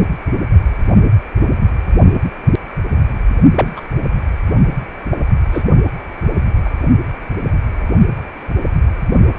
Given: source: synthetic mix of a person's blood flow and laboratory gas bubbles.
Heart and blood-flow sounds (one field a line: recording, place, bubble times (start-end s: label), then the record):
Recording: Doppler ultrasound of blood flow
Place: precordium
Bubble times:
0.95-1.10 s: bubbles
3.56-3.81 s: bubbles
5.11-5.18 s: bubbles
5.52-5.64 s: bubbles
6.65-6.70 s: bubbles
From the record:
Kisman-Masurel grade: 122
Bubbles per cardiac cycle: 1 to 2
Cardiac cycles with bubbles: 10 to 50%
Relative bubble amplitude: moderate (0.250 to 0.450)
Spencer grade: 2 (many but less than half of the cardiac periods contain bubble signals, singularly or in groups)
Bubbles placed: only in the low amplitude regions of the cardiac cycle